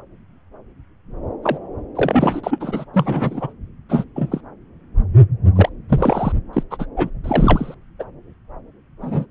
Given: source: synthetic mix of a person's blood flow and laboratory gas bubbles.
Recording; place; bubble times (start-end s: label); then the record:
Doppler ultrasound of blood flow; subclavian vein
1.43-1.57 s: bubbles
1.95-2.40 s: bubbles
2.43-2.85 s: bubbles
2.93-3.53 s: bubbles
3.89-4.04 s: bubbles
4.16-4.41 s: bubbles
5.55-5.69 s: bubbles
5.88-6.32 s: bubbles
6.53-6.63 s: bubbles
6.71-6.86 s: bubbles
6.96-7.10 s: bubbles
7.24-7.75 s: bubbles
7.99-8.04 s: bubbles
9.01-9.26 s: bubbles
From the record:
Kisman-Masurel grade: 232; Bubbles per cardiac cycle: several, 3 to 8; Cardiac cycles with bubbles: 50 to 99%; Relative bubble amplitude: moderate (0.250 to 0.450); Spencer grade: 3 (all of the cardiac periods contain showers or single bubble signals, but not dominating or overriding the cardiac motion signals); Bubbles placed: anywhere in the cardiac cycle